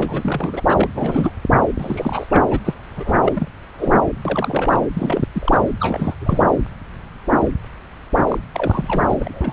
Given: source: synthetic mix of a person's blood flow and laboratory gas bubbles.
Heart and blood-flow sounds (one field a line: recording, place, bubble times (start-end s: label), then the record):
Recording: Doppler ultrasound of blood flow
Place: subclavian vein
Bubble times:
0.00-0.66 s: bubbles
0.69-0.88 s: bubbles
0.95-1.32 s: bubbles
1.78-2.27 s: bubbles
2.30-2.59 s: bubbles
2.64-2.74 s: bubbles
2.96-3.18 s: bubbles
3.20-3.48 s: bubbles
3.78-3.96 s: bubbles
4.25-4.80 s: bubbles
4.93-5.25 s: bubbles
5.33-5.62 s: bubbles
5.79-6.15 s: bubbles
6.21-6.55 s: bubbles
8.28-8.38 s: bubbles
8.54-9.14 s: bubbles
9.20-9.53 s: bubbles
From the record:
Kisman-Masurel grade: 332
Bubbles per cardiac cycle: rolling drumbeat, 9 or more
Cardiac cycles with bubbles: 50 to 99%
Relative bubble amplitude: moderate (0.250 to 0.450)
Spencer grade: 3 (all of the cardiac periods contain showers or single bubble signals, but not dominating or overriding the cardiac motion signals)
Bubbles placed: anywhere in the cardiac cycle